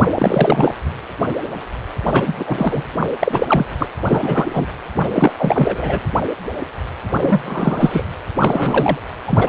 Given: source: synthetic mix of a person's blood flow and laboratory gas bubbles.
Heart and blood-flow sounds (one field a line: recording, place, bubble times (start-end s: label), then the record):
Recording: Doppler ultrasound of blood flow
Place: precordium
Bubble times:
0.18-0.74 s: bubbles
2.06-2.33 s: bubbles
2.36-2.84 s: bubbles
2.98-3.07 s: bubbles
3.19-3.66 s: bubbles
3.79-3.87 s: bubbles
4.08-4.67 s: bubbles
5.12-5.31 s: bubbles
5.37-6.00 s: bubbles
7.21-8.03 s: bubbles
8.40-8.98 s: bubbles
9.28-9.48 s: bubbles
From the record:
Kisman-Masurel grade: 333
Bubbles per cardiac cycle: rolling drumbeat, 9 or more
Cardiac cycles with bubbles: 50 to 99%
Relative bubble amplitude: loud (0.450 to 0.775)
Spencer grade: 3 (all of the cardiac periods contain showers or single bubble signals, but not dominating or overriding the cardiac motion signals)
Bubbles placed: anywhere in the cardiac cycle